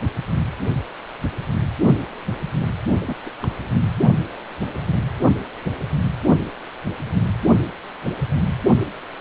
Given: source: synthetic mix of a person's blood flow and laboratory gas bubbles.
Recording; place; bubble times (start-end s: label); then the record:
Doppler ultrasound of blood flow; precordium
2.89-3.15 s: bubbles
3.25-3.30 s: bubbles
3.42-3.82 s: bubbles
From the record:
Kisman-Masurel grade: 211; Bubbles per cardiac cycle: several, 3 to 8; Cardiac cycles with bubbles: 1 to 10%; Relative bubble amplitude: barely perceptible (0.100 to 0.250); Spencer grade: 1 (occasional bubble signal discernible with the cardiac motion signal, with majority of cardiac periods free of bubbles); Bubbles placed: anywhere in the cardiac cycle